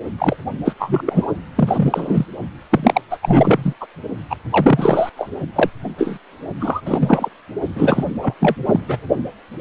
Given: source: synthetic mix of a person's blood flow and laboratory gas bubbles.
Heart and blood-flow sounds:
Doppler ultrasound of blood flow; precordium
0.18-0.36 s: bubbles
0.65-0.74 s: bubbles
0.79-1.26 s: bubbles
1.55-2.26 s: bubbles
2.71-3.02 s: bubbles
3.10-3.17 s: bubbles
3.21-3.73 s: bubbles
3.80-3.86 s: bubbles
4.29-4.35 s: bubbles
4.51-5.09 s: bubbles
5.17-5.30 s: bubbles
5.55-5.70 s: bubbles
5.98-6.18 s: bubbles
6.60-6.81 s: bubbles
6.85-7.29 s: bubbles
7.75-8.05 s: bubbles
8.21-8.35 s: bubbles
8.39-8.55 s: bubbles
8.66-8.98 s: bubbles
From the record:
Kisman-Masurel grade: 333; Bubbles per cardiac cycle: rolling drumbeat, 9 or more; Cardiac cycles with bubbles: 50 to 99%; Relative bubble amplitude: loud (0.450 to 0.775); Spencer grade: 3 (all of the cardiac periods contain showers or single bubble signals, but not dominating or overriding the cardiac motion signals); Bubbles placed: only in the low amplitude regions of the cardiac cycle

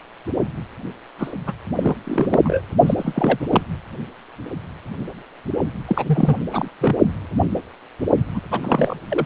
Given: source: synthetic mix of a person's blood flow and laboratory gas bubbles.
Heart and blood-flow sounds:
Doppler ultrasound of blood flow; precordium
1.18-1.32 s: bubbles
1.47-1.53 s: bubbles
1.76-1.96 s: bubbles
2.04-2.40 s: bubbles
2.43-2.62 s: bubbles
2.86-2.94 s: bubbles
2.97-3.47 s: bubbles
3.50-3.63 s: bubbles
5.87-6.36 s: bubbles
6.51-6.68 s: bubbles
6.80-6.95 s: bubbles
8.35-8.41 s: bubbles
8.51-8.97 s: bubbles
9.10-9.26 s: bubbles
From the record:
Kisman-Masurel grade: 332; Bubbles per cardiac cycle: rolling drumbeat, 9 or more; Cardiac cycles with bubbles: 50 to 99%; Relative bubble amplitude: moderate (0.250 to 0.450); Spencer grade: 3 (all of the cardiac periods contain showers or single bubble signals, but not dominating or overriding the cardiac motion signals); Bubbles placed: only in the low amplitude regions of the cardiac cycle

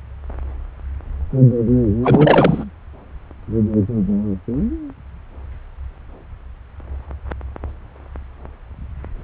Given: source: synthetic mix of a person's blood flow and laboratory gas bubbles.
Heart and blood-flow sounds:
Doppler ultrasound of blood flow; subclavian vein
2.03-2.65 s: bubbles
From the record:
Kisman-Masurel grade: 213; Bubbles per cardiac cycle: several, 3 to 8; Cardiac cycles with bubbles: 1 to 10%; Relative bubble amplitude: loud (0.450 to 0.775); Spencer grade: 1 (occasional bubble signal discernible with the cardiac motion signal, with majority of cardiac periods free of bubbles); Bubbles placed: anywhere in the cardiac cycle

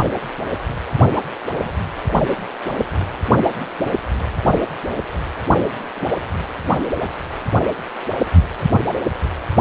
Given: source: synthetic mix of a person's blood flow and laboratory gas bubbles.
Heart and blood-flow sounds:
Doppler ultrasound of blood flow; precordium
0.97-1.05 s: bubbles
1.51-1.69 s: bubbles
2.08-2.35 s: bubbles
5.94-6.09 s: bubbles
From the record:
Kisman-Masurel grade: 121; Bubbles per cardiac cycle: 1 to 2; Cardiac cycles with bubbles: 10 to 50%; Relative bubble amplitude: barely perceptible (0.100 to 0.250); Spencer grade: 2 (many but less than half of the cardiac periods contain bubble signals, singularly or in groups); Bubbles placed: anywhere in the cardiac cycle

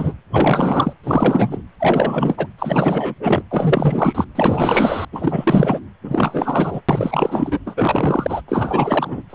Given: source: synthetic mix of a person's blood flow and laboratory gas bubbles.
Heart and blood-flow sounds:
Doppler ultrasound of blood flow; precordium
0.00-0.13 s: bubbles
0.33-0.94 s: bubbles
1.03-1.61 s: bubbles
1.80-2.47 s: bubbles
2.58-3.15 s: bubbles
3.19-3.41 s: bubbles
3.51-4.25 s: bubbles
4.35-5.05 s: bubbles
5.12-5.80 s: bubbles
6.04-6.81 s: bubbles
6.89-7.59 s: bubbles
7.66-8.41 s: bubbles
8.48-9.22 s: bubbles
9.29-9.35 s: bubbles
From the record:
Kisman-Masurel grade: 444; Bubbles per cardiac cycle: continuous sound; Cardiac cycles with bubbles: 100%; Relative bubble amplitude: maximal (0.775 to 0.999); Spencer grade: 4 (maximum detectable bubble signal sounding continuously throughout systole and diastole of every cardiac period, and overriding the amplitude of the normal cardiac signals); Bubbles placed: anywhere in the cardiac cycle

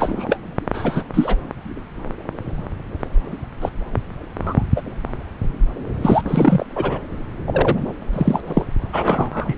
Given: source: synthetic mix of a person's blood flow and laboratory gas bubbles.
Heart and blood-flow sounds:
Doppler ultrasound of blood flow; subclavian vein
0.00-0.39 s: bubbles
0.73-1.04 s: bubbles
1.13-1.37 s: bubbles
3.61-3.69 s: bubbles
4.42-4.63 s: bubbles
4.76-4.82 s: bubbles
6.01-6.22 s: bubbles
6.25-6.65 s: bubbles
6.75-7.00 s: bubbles
7.47-7.77 s: bubbles
8.12-8.40 s: bubbles
8.46-8.66 s: bubbles
8.92-9.54 s: bubbles
From the record:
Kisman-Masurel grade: 233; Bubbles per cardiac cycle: several, 3 to 8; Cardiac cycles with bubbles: 50 to 99%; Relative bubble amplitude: loud (0.450 to 0.775); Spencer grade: 3 (all of the cardiac periods contain showers or single bubble signals, but not dominating or overriding the cardiac motion signals); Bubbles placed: anywhere in the cardiac cycle

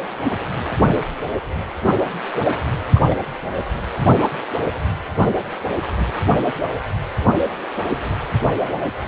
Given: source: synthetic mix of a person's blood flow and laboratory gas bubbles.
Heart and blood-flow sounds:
Doppler ultrasound of blood flow; precordium
2.95-3.04 s: bubbles
3.10-3.15 s: bubbles
From the record:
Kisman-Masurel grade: 112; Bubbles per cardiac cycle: 1 to 2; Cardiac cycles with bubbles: 1 to 10%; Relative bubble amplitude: moderate (0.250 to 0.450); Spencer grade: 1 (occasional bubble signal discernible with the cardiac motion signal, with majority of cardiac periods free of bubbles); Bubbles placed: anywhere in the cardiac cycle

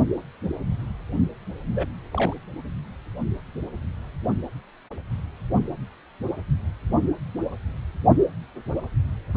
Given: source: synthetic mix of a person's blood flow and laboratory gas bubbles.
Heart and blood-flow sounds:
Doppler ultrasound of blood flow; precordium
1.76-1.87 s: bubbles
2.14-2.34 s: bubbles
From the record:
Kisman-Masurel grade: 111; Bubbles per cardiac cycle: 1 to 2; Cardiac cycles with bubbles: 1 to 10%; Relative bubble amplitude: barely perceptible (0.100 to 0.250); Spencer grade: 1 (occasional bubble signal discernible with the cardiac motion signal, with majority of cardiac periods free of bubbles); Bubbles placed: only in the low amplitude regions of the cardiac cycle

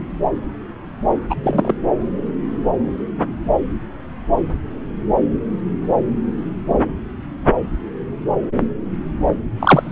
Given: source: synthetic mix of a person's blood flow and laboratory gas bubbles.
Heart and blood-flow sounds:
Doppler ultrasound of blood flow; subclavian vein
1.29-1.35 s: bubbles
1.43-1.73 s: bubbles
9.60-9.92 s: bubbles
From the record:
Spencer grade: 2 (many but less than half of the cardiac periods contain bubble signals, singularly or in groups); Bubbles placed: anywhere in the cardiac cycle

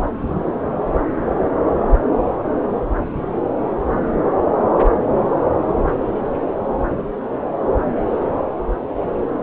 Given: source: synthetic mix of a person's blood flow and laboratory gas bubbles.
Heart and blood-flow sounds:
Doppler ultrasound of blood flow; subclavian vein
no bubbles
From the record:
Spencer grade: 0 (complete lack of bubble signals)

